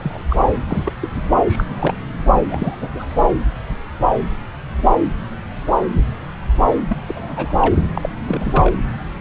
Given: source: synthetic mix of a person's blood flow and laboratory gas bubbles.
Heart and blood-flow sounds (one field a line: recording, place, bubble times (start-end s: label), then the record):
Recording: Doppler ultrasound of blood flow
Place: subclavian vein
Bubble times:
0.02-0.22 s: bubbles
0.29-0.37 s: bubbles
0.67-0.92 s: bubbles
1.02-1.08 s: bubbles
1.46-1.65 s: bubbles
1.69-1.94 s: bubbles
2.48-2.75 s: bubbles
2.80-2.89 s: bubbles
2.94-3.05 s: bubbles
6.88-6.98 s: bubbles
7.08-7.93 s: bubbles
7.97-8.09 s: bubbles
8.28-8.73 s: bubbles
From the record:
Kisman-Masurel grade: 232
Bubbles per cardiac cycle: several, 3 to 8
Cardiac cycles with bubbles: 50 to 99%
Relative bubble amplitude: moderate (0.250 to 0.450)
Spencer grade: 3 (all of the cardiac periods contain showers or single bubble signals, but not dominating or overriding the cardiac motion signals)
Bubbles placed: anywhere in the cardiac cycle